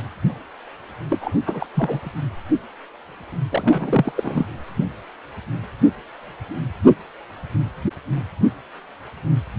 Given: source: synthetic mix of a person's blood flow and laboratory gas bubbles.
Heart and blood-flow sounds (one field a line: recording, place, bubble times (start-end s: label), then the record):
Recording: Doppler ultrasound of blood flow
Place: precordium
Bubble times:
1.10-1.36 s: bubbles
1.46-1.67 s: bubbles
1.75-2.10 s: bubbles
3.50-4.46 s: bubbles
From the record:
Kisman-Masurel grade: 222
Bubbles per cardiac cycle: several, 3 to 8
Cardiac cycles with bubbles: 10 to 50%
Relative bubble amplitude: moderate (0.250 to 0.450)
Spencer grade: 2 (many but less than half of the cardiac periods contain bubble signals, singularly or in groups)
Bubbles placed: anywhere in the cardiac cycle